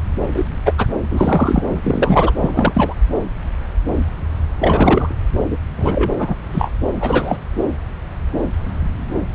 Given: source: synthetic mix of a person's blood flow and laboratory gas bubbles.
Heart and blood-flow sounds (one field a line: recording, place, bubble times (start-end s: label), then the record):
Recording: Doppler ultrasound of blood flow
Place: subclavian vein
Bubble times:
0.34-0.45 s: bubbles
0.65-0.73 s: bubbles
0.77-0.86 s: bubbles
1.10-1.64 s: bubbles
1.69-2.32 s: bubbles
2.41-2.94 s: bubbles
4.61-5.14 s: bubbles
5.50-5.58 s: bubbles
5.76-6.10 s: bubbles
6.18-6.35 s: bubbles
6.52-6.71 s: bubbles
7.00-7.38 s: bubbles
From the record:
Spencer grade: 3 (all of the cardiac periods contain showers or single bubble signals, but not dominating or overriding the cardiac motion signals)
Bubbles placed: anywhere in the cardiac cycle